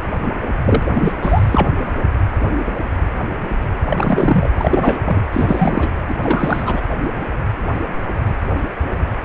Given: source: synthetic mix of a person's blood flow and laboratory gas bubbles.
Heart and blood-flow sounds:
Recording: Doppler ultrasound of blood flow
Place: precordium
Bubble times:
0.64-0.83 s: bubbles
0.85-1.13 s: bubbles
1.22-1.69 s: bubbles
3.90-4.49 s: bubbles
4.57-5.01 s: bubbles
5.04-5.21 s: bubbles
5.32-5.93 s: bubbles
6.08-6.14 s: bubbles
6.23-6.82 s: bubbles
9.23-9.25 s: bubbles
From the record:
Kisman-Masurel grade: 332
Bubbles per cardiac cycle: rolling drumbeat, 9 or more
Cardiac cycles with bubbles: 50 to 99%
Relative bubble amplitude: moderate (0.250 to 0.450)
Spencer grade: 3 (all of the cardiac periods contain showers or single bubble signals, but not dominating or overriding the cardiac motion signals)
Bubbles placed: anywhere in the cardiac cycle

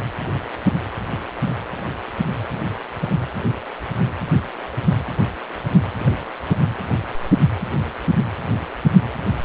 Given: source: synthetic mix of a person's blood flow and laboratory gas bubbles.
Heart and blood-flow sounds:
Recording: Doppler ultrasound of blood flow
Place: precordium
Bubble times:
6.00-6.24 s: bubbles
From the record:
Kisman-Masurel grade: 111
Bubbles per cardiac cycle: 1 to 2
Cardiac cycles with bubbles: 1 to 10%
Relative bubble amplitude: barely perceptible (0.100 to 0.250)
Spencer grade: 1 (occasional bubble signal discernible with the cardiac motion signal, with majority of cardiac periods free of bubbles)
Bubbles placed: anywhere in the cardiac cycle

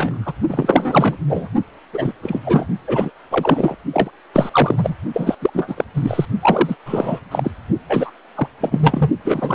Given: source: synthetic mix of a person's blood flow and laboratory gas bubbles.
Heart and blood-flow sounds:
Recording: Doppler ultrasound of blood flow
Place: precordium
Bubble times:
0.00-0.33 s: bubbles
0.49-1.17 s: bubbles
1.27-1.48 s: bubbles
1.93-2.12 s: bubbles
2.23-2.40 s: bubbles
2.45-2.67 s: bubbles
2.87-3.10 s: bubbles
3.31-3.75 s: bubbles
3.93-4.11 s: bubbles
4.33-4.95 s: bubbles
5.14-5.36 s: bubbles
5.42-5.50 s: bubbles
5.54-5.85 s: bubbles
5.94-6.25 s: bubbles
6.41-6.76 s: bubbles
6.86-7.20 s: bubbles
7.31-7.51 s: bubbles
7.89-8.11 s: bubbles
8.35-8.48 s: bubbles
8.60-9.10 s: bubbles
9.25-9.55 s: bubbles
From the record:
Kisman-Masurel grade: 343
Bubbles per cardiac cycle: rolling drumbeat, 9 or more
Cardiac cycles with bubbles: 100%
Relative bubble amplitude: loud (0.450 to 0.775)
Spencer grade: 3 (all of the cardiac periods contain showers or single bubble signals, but not dominating or overriding the cardiac motion signals)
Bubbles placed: only in the low amplitude regions of the cardiac cycle

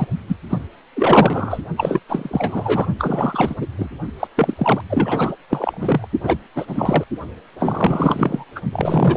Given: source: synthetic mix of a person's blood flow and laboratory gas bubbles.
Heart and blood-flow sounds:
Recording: Doppler ultrasound of blood flow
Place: precordium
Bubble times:
0.00-0.07 s: bubbles
0.29-0.35 s: bubbles
0.49-0.58 s: bubbles
0.95-1.61 s: bubbles
1.76-2.00 s: bubbles
2.08-2.87 s: bubbles
2.98-3.54 s: bubbles
3.61-3.67 s: bubbles
3.78-3.90 s: bubbles
4.20-4.28 s: bubbles
4.36-4.82 s: bubbles
4.90-5.36 s: bubbles
5.50-6.08 s: bubbles
6.23-6.38 s: bubbles
6.56-7.04 s: bubbles
7.58-8.45 s: bubbles
8.55-8.61 s: bubbles
8.71-9.17 s: bubbles
From the record:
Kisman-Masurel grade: 444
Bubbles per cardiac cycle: continuous sound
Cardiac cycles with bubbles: 100%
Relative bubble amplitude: maximal (0.775 to 0.999)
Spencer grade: 4 (maximum detectable bubble signal sounding continuously throughout systole and diastole of every cardiac period, and overriding the amplitude of the normal cardiac signals)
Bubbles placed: only in the low amplitude regions of the cardiac cycle

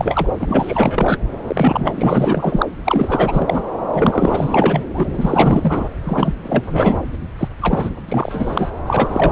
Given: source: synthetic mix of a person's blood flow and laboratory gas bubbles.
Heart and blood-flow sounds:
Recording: Doppler ultrasound of blood flow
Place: subclavian vein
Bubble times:
0.00-0.27 s: bubbles
0.38-1.19 s: bubbles
1.47-2.67 s: bubbles
2.84-3.62 s: bubbles
3.93-4.85 s: bubbles
4.94-5.88 s: bubbles
6.04-6.33 s: bubbles
6.44-6.98 s: bubbles
7.38-7.48 s: bubbles
7.62-7.89 s: bubbles
8.08-8.71 s: bubbles
8.87-9.32 s: bubbles
From the record:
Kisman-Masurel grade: 444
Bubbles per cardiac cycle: continuous sound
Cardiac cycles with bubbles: 100%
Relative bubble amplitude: maximal (0.775 to 0.999)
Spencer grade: 4 (maximum detectable bubble signal sounding continuously throughout systole and diastole of every cardiac period, and overriding the amplitude of the normal cardiac signals)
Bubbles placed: anywhere in the cardiac cycle

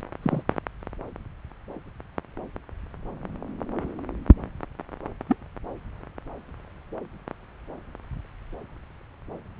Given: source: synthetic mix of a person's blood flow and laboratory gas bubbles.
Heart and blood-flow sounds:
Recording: Doppler ultrasound of blood flow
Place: subclavian vein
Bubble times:
0.22-0.42 s: bubbles
5.29-5.36 s: bubbles
From the record:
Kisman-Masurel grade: 122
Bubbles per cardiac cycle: 1 to 2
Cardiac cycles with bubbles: 10 to 50%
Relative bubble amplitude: moderate (0.250 to 0.450)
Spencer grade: 2 (many but less than half of the cardiac periods contain bubble signals, singularly or in groups)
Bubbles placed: anywhere in the cardiac cycle

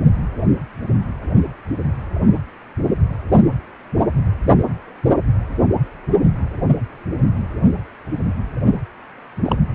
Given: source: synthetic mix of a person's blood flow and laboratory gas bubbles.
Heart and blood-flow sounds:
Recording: Doppler ultrasound of blood flow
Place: precordium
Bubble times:
9.45-9.56 s: bubbles
From the record:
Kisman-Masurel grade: 112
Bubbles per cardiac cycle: 1 to 2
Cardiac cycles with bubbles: 1 to 10%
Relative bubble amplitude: moderate (0.250 to 0.450)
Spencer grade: 1 (occasional bubble signal discernible with the cardiac motion signal, with majority of cardiac periods free of bubbles)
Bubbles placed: only in the low amplitude regions of the cardiac cycle

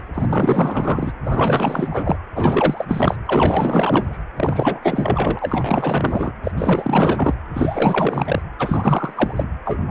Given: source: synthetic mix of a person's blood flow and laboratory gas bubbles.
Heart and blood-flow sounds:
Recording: Doppler ultrasound of blood flow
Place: precordium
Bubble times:
0.14-1.12 s: bubbles
1.24-2.17 s: bubbles
2.35-2.85 s: bubbles
2.88-3.17 s: bubbles
3.26-4.22 s: bubbles
4.36-4.79 s: bubbles
4.82-6.33 s: bubbles
6.43-6.51 s: bubbles
6.56-7.34 s: bubbles
7.54-8.42 s: bubbles
8.59-9.48 s: bubbles
9.65-9.83 s: bubbles
9.87-9.91 s: bubbles
From the record:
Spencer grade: 4 (maximum detectable bubble signal sounding continuously throughout systole and diastole of every cardiac period, and overriding the amplitude of the normal cardiac signals)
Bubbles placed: anywhere in the cardiac cycle

